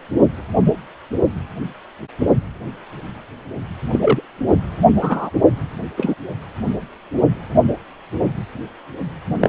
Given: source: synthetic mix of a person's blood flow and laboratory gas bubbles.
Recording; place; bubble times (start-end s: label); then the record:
Doppler ultrasound of blood flow; precordium
3.92-4.21 s: bubbles
5.02-5.30 s: bubbles
5.97-6.14 s: bubbles
9.39-9.49 s: bubbles
From the record:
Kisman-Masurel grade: 123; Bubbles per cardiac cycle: 1 to 2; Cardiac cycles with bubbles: 10 to 50%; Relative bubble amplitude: loud (0.450 to 0.775); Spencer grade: 2 (many but less than half of the cardiac periods contain bubble signals, singularly or in groups); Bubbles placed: only in the low amplitude regions of the cardiac cycle